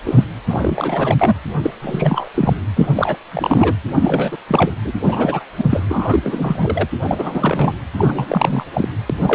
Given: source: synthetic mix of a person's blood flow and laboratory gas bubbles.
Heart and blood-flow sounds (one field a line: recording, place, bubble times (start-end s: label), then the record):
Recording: Doppler ultrasound of blood flow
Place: precordium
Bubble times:
0.05-0.24 s: bubbles
0.48-1.35 s: bubbles
1.63-1.71 s: bubbles
1.82-2.29 s: bubbles
2.34-2.53 s: bubbles
2.75-2.87 s: bubbles
2.95-3.16 s: bubbles
3.31-3.75 s: bubbles
3.93-4.38 s: bubbles
4.48-4.71 s: bubbles
4.84-4.92 s: bubbles
5.02-5.43 s: bubbles
5.57-5.64 s: bubbles
5.69-5.83 s: bubbles
5.88-6.86 s: bubbles
7.02-7.78 s: bubbles
7.95-8.66 s: bubbles
8.74-8.88 s: bubbles
9.10-9.14 s: bubbles
9.21-9.35 s: bubbles
From the record:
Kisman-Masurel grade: 333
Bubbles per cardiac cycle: rolling drumbeat, 9 or more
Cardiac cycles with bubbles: 50 to 99%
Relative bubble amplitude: loud (0.450 to 0.775)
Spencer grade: 3 (all of the cardiac periods contain showers or single bubble signals, but not dominating or overriding the cardiac motion signals)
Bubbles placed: anywhere in the cardiac cycle